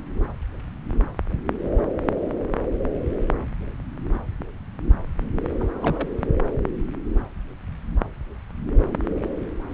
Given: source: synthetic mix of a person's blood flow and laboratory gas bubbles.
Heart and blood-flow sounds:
Doppler ultrasound of blood flow; subclavian vein
5.60-6.09 s: bubbles
From the record:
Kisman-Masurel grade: 111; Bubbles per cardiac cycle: 1 to 2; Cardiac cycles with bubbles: 1 to 10%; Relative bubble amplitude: barely perceptible (0.100 to 0.250); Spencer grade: 1 (occasional bubble signal discernible with the cardiac motion signal, with majority of cardiac periods free of bubbles); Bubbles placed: anywhere in the cardiac cycle

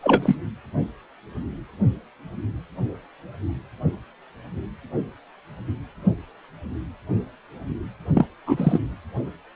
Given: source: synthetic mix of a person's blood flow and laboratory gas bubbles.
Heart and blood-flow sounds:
Doppler ultrasound of blood flow; precordium
0.01-0.36 s: bubbles
8.14-8.25 s: bubbles
8.46-8.79 s: bubbles
From the record:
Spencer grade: 2 (many but less than half of the cardiac periods contain bubble signals, singularly or in groups); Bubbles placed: anywhere in the cardiac cycle

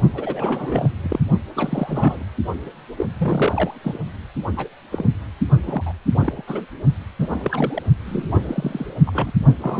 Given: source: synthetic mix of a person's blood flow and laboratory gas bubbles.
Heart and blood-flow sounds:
Doppler ultrasound of blood flow; precordium
0.13-0.89 s: bubbles
1.02-1.19 s: bubbles
1.56-2.23 s: bubbles
2.98-3.06 s: bubbles
3.18-3.75 s: bubbles
3.83-3.98 s: bubbles
4.57-4.67 s: bubbles
4.92-5.04 s: bubbles
5.64-5.83 s: bubbles
5.86-5.93 s: bubbles
6.21-6.42 s: bubbles
6.47-6.62 s: bubbles
7.20-7.83 s: bubbles
8.05-8.94 s: bubbles
9.06-9.31 s: bubbles
9.62-9.80 s: bubbles
From the record:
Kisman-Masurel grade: 242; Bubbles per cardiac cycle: several, 3 to 8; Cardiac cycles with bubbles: 100%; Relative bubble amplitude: moderate (0.250 to 0.450); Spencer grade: 3 (all of the cardiac periods contain showers or single bubble signals, but not dominating or overriding the cardiac motion signals); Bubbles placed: only in the low amplitude regions of the cardiac cycle

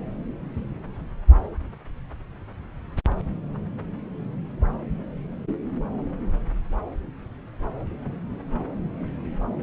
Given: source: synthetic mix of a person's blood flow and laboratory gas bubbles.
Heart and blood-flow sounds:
Doppler ultrasound of blood flow; subclavian vein
no bubbles
From the record:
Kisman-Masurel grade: 000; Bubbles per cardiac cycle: 0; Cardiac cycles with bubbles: 0%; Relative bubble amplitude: no bubbles discernible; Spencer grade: 0 (complete lack of bubble signals)

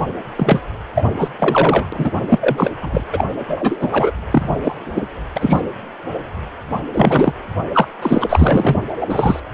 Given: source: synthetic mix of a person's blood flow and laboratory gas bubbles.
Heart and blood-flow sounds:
Doppler ultrasound of blood flow; precordium
0.35-0.60 s: bubbles
0.95-1.07 s: bubbles
1.20-1.28 s: bubbles
1.39-1.88 s: bubbles
1.92-2.11 s: bubbles
2.28-2.69 s: bubbles
2.82-3.02 s: bubbles
3.12-3.24 s: bubbles
3.47-4.12 s: bubbles
4.30-4.55 s: bubbles
4.62-5.17 s: bubbles
5.36-5.62 s: bubbles
6.93-7.33 s: bubbles
7.72-7.88 s: bubbles
8.02-8.79 s: bubbles
9.00-9.06 s: bubbles
9.09-9.40 s: bubbles
From the record:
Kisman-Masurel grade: 233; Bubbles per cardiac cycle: several, 3 to 8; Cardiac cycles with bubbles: 50 to 99%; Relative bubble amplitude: loud (0.450 to 0.775); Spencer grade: 3 (all of the cardiac periods contain showers or single bubble signals, but not dominating or overriding the cardiac motion signals); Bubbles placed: anywhere in the cardiac cycle

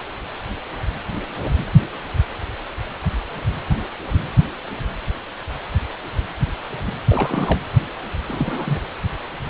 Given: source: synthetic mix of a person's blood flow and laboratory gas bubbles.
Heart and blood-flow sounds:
Doppler ultrasound of blood flow; precordium
7.08-7.58 s: bubbles
8.28-8.83 s: bubbles
From the record:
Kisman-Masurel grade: 212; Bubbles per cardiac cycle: several, 3 to 8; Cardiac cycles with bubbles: 1 to 10%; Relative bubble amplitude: moderate (0.250 to 0.450); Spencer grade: 1 (occasional bubble signal discernible with the cardiac motion signal, with majority of cardiac periods free of bubbles); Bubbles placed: anywhere in the cardiac cycle

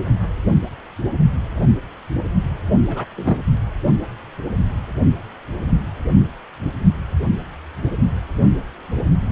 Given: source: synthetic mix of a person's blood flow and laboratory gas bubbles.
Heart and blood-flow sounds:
Doppler ultrasound of blood flow; precordium
2.88-3.05 s: bubbles
3.16-3.37 s: bubbles
From the record:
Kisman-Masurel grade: 123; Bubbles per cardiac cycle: 1 to 2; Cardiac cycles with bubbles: 10 to 50%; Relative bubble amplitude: loud (0.450 to 0.775); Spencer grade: 2 (many but less than half of the cardiac periods contain bubble signals, singularly or in groups); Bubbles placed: only in the low amplitude regions of the cardiac cycle

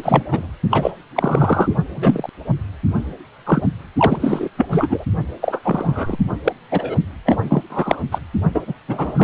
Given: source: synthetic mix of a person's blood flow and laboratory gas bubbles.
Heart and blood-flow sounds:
Doppler ultrasound of blood flow; precordium
0.00-0.24 s: bubbles
0.31-0.47 s: bubbles
0.70-0.91 s: bubbles
1.15-1.76 s: bubbles
1.96-2.29 s: bubbles
3.46-3.61 s: bubbles
3.97-4.49 s: bubbles
4.57-5.04 s: bubbles
5.42-5.61 s: bubbles
5.63-6.17 s: bubbles
6.44-6.52 s: bubbles
6.71-6.95 s: bubbles
7.25-7.38 s: bubbles
7.42-7.62 s: bubbles
7.69-8.01 s: bubbles
8.12-8.19 s: bubbles
8.54-8.62 s: bubbles
8.67-8.74 s: bubbles
8.88-9.24 s: bubbles
From the record:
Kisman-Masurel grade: 243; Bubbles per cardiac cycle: several, 3 to 8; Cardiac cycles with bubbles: 100%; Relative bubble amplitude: loud (0.450 to 0.775); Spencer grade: 3 (all of the cardiac periods contain showers or single bubble signals, but not dominating or overriding the cardiac motion signals); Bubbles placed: only in the low amplitude regions of the cardiac cycle

